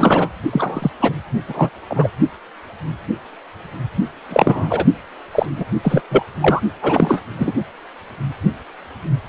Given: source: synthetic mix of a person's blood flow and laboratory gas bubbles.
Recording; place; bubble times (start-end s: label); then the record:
Doppler ultrasound of blood flow; precordium
0.00-0.28 s: bubbles
0.51-0.90 s: bubbles
1.00-1.13 s: bubbles
1.48-1.70 s: bubbles
1.89-2.08 s: bubbles
4.28-4.86 s: bubbles
5.32-5.46 s: bubbles
5.57-5.66 s: bubbles
5.83-6.02 s: bubbles
6.10-6.23 s: bubbles
6.41-6.61 s: bubbles
6.82-7.22 s: bubbles
7.39-7.53 s: bubbles
From the record:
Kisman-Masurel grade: 233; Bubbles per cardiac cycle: several, 3 to 8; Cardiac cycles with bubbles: 50 to 99%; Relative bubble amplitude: loud (0.450 to 0.775); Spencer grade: 3 (all of the cardiac periods contain showers or single bubble signals, but not dominating or overriding the cardiac motion signals); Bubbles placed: only in the low amplitude regions of the cardiac cycle